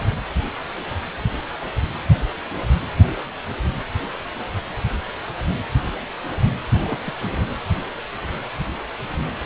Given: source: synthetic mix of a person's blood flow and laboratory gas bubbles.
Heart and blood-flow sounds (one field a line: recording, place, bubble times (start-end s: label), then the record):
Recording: Doppler ultrasound of blood flow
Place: precordium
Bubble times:
6.74-6.97 s: bubbles
7.04-7.13 s: bubbles
7.21-7.29 s: bubbles
From the record:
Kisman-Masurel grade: 211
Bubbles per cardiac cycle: several, 3 to 8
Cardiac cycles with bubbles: 1 to 10%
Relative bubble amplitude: barely perceptible (0.100 to 0.250)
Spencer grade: 1 (occasional bubble signal discernible with the cardiac motion signal, with majority of cardiac periods free of bubbles)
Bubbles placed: anywhere in the cardiac cycle